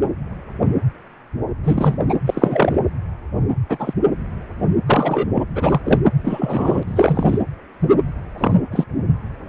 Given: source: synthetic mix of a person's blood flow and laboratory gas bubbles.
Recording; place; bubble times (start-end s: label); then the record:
Doppler ultrasound of blood flow; precordium
1.63-1.99 s: bubbles
2.08-2.15 s: bubbles
2.26-2.79 s: bubbles
3.69-3.93 s: bubbles
4.86-5.29 s: bubbles
5.34-5.44 s: bubbles
5.55-5.81 s: bubbles
5.84-6.00 s: bubbles
6.22-6.83 s: bubbles
6.87-7.39 s: bubbles
8.38-8.57 s: bubbles
8.71-8.85 s: bubbles
From the record:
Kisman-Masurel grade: 233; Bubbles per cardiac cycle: several, 3 to 8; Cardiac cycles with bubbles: 50 to 99%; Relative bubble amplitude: loud (0.450 to 0.775); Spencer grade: 3 (all of the cardiac periods contain showers or single bubble signals, but not dominating or overriding the cardiac motion signals); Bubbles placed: anywhere in the cardiac cycle